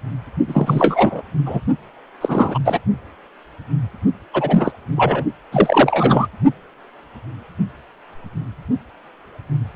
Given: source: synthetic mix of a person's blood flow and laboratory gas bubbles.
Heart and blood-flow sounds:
Doppler ultrasound of blood flow; precordium
0.47-1.21 s: bubbles
1.45-1.60 s: bubbles
2.21-2.58 s: bubbles
2.65-2.79 s: bubbles
4.33-4.71 s: bubbles
4.96-5.25 s: bubbles
5.52-6.27 s: bubbles
From the record:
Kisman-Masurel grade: 223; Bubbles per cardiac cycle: several, 3 to 8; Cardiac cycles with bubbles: 10 to 50%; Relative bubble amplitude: loud (0.450 to 0.775); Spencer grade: 2 (many but less than half of the cardiac periods contain bubble signals, singularly or in groups); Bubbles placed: only in the low amplitude regions of the cardiac cycle

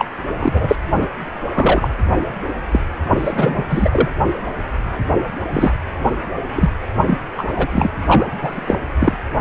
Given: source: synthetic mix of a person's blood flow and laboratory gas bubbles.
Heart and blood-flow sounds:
Doppler ultrasound of blood flow; precordium
0.00-0.06 s: bubbles
0.38-0.76 s: bubbles
0.93-1.07 s: bubbles
1.52-1.89 s: bubbles
2.71-2.79 s: bubbles
3.10-3.63 s: bubbles
3.69-4.09 s: bubbles
5.51-5.72 s: bubbles
6.55-6.69 s: bubbles
7.06-7.18 s: bubbles
7.38-7.68 s: bubbles
7.71-7.90 s: bubbles
8.07-8.26 s: bubbles
8.43-8.79 s: bubbles
8.98-9.16 s: bubbles
From the record:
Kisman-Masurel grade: 243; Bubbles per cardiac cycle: several, 3 to 8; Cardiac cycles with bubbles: 100%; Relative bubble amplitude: loud (0.450 to 0.775); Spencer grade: 3 (all of the cardiac periods contain showers or single bubble signals, but not dominating or overriding the cardiac motion signals); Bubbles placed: anywhere in the cardiac cycle

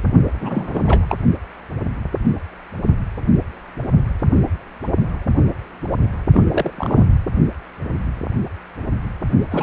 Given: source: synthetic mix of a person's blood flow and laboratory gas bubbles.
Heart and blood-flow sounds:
Doppler ultrasound of blood flow; precordium
0.40-0.81 s: bubbles
0.86-1.17 s: bubbles
6.33-6.42 s: bubbles
6.50-6.71 s: bubbles
6.77-7.04 s: bubbles
9.51-9.63 s: bubbles
From the record:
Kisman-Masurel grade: 222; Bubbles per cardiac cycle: several, 3 to 8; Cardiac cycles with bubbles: 10 to 50%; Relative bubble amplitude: moderate (0.250 to 0.450); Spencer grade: 2 (many but less than half of the cardiac periods contain bubble signals, singularly or in groups); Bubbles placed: only in the low amplitude regions of the cardiac cycle

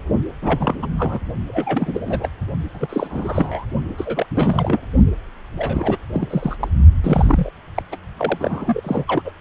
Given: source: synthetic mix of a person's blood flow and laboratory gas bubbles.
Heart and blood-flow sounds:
Doppler ultrasound of blood flow; precordium
0.41-0.78 s: bubbles
0.82-0.86 s: bubbles
0.97-1.19 s: bubbles
1.48-2.29 s: bubbles
2.74-3.65 s: bubbles
3.97-4.26 s: bubbles
4.35-4.80 s: bubbles
5.57-5.97 s: bubbles
6.13-6.56 s: bubbles
6.59-6.68 s: bubbles
7.02-7.50 s: bubbles
7.75-7.82 s: bubbles
7.91-7.96 s: bubbles
8.17-9.04 s: bubbles
9.07-9.22 s: bubbles
9.24-9.32 s: bubbles
From the record:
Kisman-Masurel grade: 332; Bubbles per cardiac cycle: rolling drumbeat, 9 or more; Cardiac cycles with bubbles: 50 to 99%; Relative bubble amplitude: moderate (0.250 to 0.450); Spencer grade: 3 (all of the cardiac periods contain showers or single bubble signals, but not dominating or overriding the cardiac motion signals); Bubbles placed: only in the low amplitude regions of the cardiac cycle

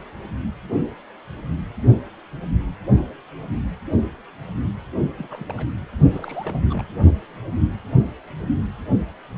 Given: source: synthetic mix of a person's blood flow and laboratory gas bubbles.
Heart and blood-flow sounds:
Doppler ultrasound of blood flow; precordium
5.17-5.54 s: bubbles
5.58-5.67 s: bubbles
6.12-6.84 s: bubbles
From the record:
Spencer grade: 2 (many but less than half of the cardiac periods contain bubble signals, singularly or in groups); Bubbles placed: only in the low amplitude regions of the cardiac cycle

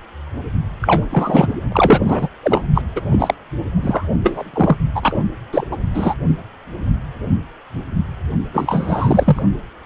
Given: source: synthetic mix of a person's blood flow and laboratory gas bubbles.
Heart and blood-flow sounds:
Doppler ultrasound of blood flow; precordium
0.82-1.07 s: bubbles
1.09-1.55 s: bubbles
1.72-2.28 s: bubbles
2.42-2.61 s: bubbles
2.74-2.82 s: bubbles
2.96-3.01 s: bubbles
3.10-3.34 s: bubbles
3.77-4.08 s: bubbles
4.23-4.51 s: bubbles
4.54-4.77 s: bubbles
4.95-5.18 s: bubbles
5.52-5.68 s: bubbles
5.72-5.77 s: bubbles
5.94-6.15 s: bubbles
8.53-9.42 s: bubbles
From the record:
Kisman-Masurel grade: 333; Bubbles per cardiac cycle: rolling drumbeat, 9 or more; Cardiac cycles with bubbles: 50 to 99%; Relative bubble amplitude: loud (0.450 to 0.775); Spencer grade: 3 (all of the cardiac periods contain showers or single bubble signals, but not dominating or overriding the cardiac motion signals); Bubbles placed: only in the low amplitude regions of the cardiac cycle

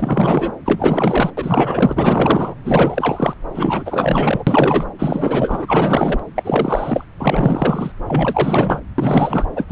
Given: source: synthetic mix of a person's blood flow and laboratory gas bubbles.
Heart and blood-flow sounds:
Doppler ultrasound of blood flow; subclavian vein
0.00-0.52 s: bubbles
0.65-1.30 s: bubbles
1.37-2.54 s: bubbles
2.65-3.33 s: bubbles
3.54-4.43 s: bubbles
4.46-4.86 s: bubbles
4.98-6.19 s: bubbles
6.35-7.04 s: bubbles
7.18-7.92 s: bubbles
8.07-8.80 s: bubbles
8.98-9.46 s: bubbles
9.55-9.72 s: bubbles
From the record:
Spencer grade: 4 (maximum detectable bubble signal sounding continuously throughout systole and diastole of every cardiac period, and overriding the amplitude of the normal cardiac signals); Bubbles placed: anywhere in the cardiac cycle

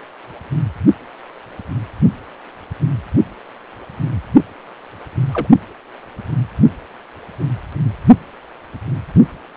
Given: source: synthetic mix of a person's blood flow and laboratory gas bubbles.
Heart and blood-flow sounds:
Doppler ultrasound of blood flow; precordium
5.33-5.47 s: bubbles
From the record:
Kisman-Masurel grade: 112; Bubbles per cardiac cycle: 1 to 2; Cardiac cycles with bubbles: 1 to 10%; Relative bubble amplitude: moderate (0.250 to 0.450); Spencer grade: 1 (occasional bubble signal discernible with the cardiac motion signal, with majority of cardiac periods free of bubbles); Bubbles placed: only in the low amplitude regions of the cardiac cycle

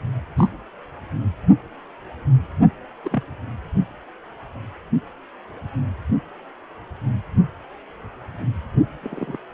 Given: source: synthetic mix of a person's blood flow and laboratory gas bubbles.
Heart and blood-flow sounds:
Doppler ultrasound of blood flow; precordium
0.38-0.49 s: bubbles
3.04-3.24 s: bubbles
9.03-9.37 s: bubbles
From the record:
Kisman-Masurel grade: 121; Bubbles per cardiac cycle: 1 to 2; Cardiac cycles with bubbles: 10 to 50%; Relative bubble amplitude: barely perceptible (0.100 to 0.250); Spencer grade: 2 (many but less than half of the cardiac periods contain bubble signals, singularly or in groups); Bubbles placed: anywhere in the cardiac cycle

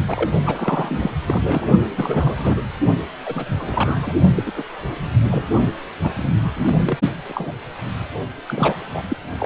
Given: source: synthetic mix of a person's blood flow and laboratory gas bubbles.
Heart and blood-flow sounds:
Doppler ultrasound of blood flow; precordium
0.08-0.31 s: bubbles
0.46-0.98 s: bubbles
1.02-1.10 s: bubbles
1.27-1.67 s: bubbles
1.85-2.65 s: bubbles
3.25-3.49 s: bubbles
3.58-4.17 s: bubbles
4.35-4.52 s: bubbles
4.55-4.63 s: bubbles
5.29-5.45 s: bubbles
6.02-6.37 s: bubbles
6.43-6.51 s: bubbles
6.56-6.98 s: bubbles
7.28-7.57 s: bubbles
8.46-8.86 s: bubbles
8.93-9.03 s: bubbles
9.10-9.16 s: bubbles
9.38-9.46 s: bubbles
From the record:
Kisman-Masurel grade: 242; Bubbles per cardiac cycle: several, 3 to 8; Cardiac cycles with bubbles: 100%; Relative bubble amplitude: moderate (0.250 to 0.450); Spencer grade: 3 (all of the cardiac periods contain showers or single bubble signals, but not dominating or overriding the cardiac motion signals); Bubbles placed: only in the low amplitude regions of the cardiac cycle

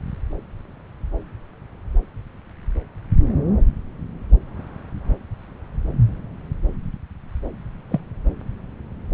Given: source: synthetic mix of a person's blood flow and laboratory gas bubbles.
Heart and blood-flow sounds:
Doppler ultrasound of blood flow; subclavian vein
7.90-8.00 s: bubbles
From the record:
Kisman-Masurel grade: 112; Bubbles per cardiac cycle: 1 to 2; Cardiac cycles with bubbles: 1 to 10%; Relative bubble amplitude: moderate (0.250 to 0.450); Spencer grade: 1 (occasional bubble signal discernible with the cardiac motion signal, with majority of cardiac periods free of bubbles); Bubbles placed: anywhere in the cardiac cycle

